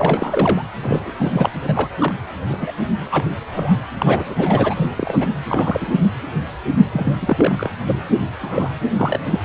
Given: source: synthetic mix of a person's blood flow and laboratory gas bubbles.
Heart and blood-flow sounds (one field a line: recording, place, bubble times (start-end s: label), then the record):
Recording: Doppler ultrasound of blood flow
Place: precordium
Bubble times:
0.00-0.65 s: bubbles
0.82-1.11 s: bubbles
1.18-1.51 s: bubbles
1.60-1.89 s: bubbles
1.99-2.13 s: bubbles
2.49-2.57 s: bubbles
2.61-2.71 s: bubbles
3.11-3.25 s: bubbles
3.52-3.74 s: bubbles
3.98-4.87 s: bubbles
4.97-5.27 s: bubbles
5.47-5.94 s: bubbles
6.03-6.09 s: bubbles
6.92-7.68 s: bubbles
7.87-8.00 s: bubbles
8.41-8.70 s: bubbles
8.97-9.19 s: bubbles
9.30-9.40 s: bubbles
From the record:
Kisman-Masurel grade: 242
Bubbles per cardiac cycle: several, 3 to 8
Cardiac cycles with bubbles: 100%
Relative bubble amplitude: moderate (0.250 to 0.450)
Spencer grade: 3 (all of the cardiac periods contain showers or single bubble signals, but not dominating or overriding the cardiac motion signals)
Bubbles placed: anywhere in the cardiac cycle